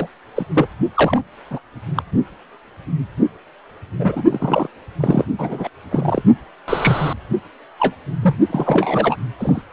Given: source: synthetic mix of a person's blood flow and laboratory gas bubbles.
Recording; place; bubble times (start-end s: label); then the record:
Doppler ultrasound of blood flow; precordium
0.00-0.07 s: bubbles
0.35-0.45 s: bubbles
0.54-0.66 s: bubbles
0.94-1.22 s: bubbles
1.50-1.59 s: bubbles
1.95-2.02 s: bubbles
3.99-4.24 s: bubbles
4.30-4.68 s: bubbles
5.00-5.25 s: bubbles
5.39-5.69 s: bubbles
5.91-6.23 s: bubbles
6.68-7.13 s: bubbles
7.79-7.95 s: bubbles
8.21-8.35 s: bubbles
8.49-9.16 s: bubbles
9.38-9.62 s: bubbles
From the record:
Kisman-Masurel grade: 232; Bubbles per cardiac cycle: several, 3 to 8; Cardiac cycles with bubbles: 50 to 99%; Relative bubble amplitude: moderate (0.250 to 0.450); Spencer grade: 3 (all of the cardiac periods contain showers or single bubble signals, but not dominating or overriding the cardiac motion signals); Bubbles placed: anywhere in the cardiac cycle